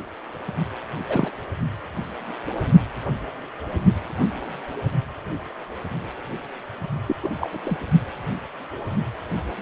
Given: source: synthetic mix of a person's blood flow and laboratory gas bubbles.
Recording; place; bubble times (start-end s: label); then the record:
Doppler ultrasound of blood flow; precordium
1.08-1.32 s: bubbles
7.07-7.16 s: bubbles
7.22-7.29 s: bubbles
7.38-7.48 s: bubbles
7.52-7.59 s: bubbles
7.64-7.78 s: bubbles
From the record:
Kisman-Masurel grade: 222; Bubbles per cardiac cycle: several, 3 to 8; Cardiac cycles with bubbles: 10 to 50%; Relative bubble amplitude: moderate (0.250 to 0.450); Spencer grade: 2 (many but less than half of the cardiac periods contain bubble signals, singularly or in groups); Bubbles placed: only in the low amplitude regions of the cardiac cycle